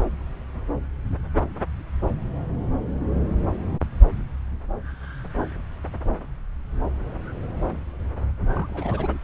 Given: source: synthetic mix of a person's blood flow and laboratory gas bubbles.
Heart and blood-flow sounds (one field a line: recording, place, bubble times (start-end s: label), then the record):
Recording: Doppler ultrasound of blood flow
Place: subclavian vein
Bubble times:
8.54-9.17 s: bubbles
From the record:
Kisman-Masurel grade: 221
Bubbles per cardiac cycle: several, 3 to 8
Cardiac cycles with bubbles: 10 to 50%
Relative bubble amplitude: barely perceptible (0.100 to 0.250)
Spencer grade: 2 (many but less than half of the cardiac periods contain bubble signals, singularly or in groups)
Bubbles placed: anywhere in the cardiac cycle